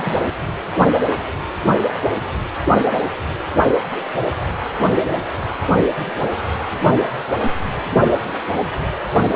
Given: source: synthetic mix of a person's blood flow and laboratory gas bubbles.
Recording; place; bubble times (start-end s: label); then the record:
Doppler ultrasound of blood flow; precordium
0.00-0.20 s: bubbles
From the record:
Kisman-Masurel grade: 212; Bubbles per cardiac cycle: several, 3 to 8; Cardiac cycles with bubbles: 1 to 10%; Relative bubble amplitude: moderate (0.250 to 0.450); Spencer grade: 1 (occasional bubble signal discernible with the cardiac motion signal, with majority of cardiac periods free of bubbles); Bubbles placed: anywhere in the cardiac cycle